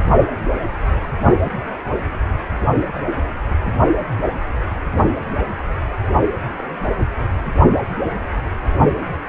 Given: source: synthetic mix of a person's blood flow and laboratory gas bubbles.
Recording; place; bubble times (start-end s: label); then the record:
Doppler ultrasound of blood flow; precordium
6.55-6.69 s: bubbles
From the record:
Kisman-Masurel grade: 111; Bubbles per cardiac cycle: 1 to 2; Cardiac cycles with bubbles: 1 to 10%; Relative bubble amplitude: barely perceptible (0.100 to 0.250); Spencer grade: 1 (occasional bubble signal discernible with the cardiac motion signal, with majority of cardiac periods free of bubbles); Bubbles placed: only in the low amplitude regions of the cardiac cycle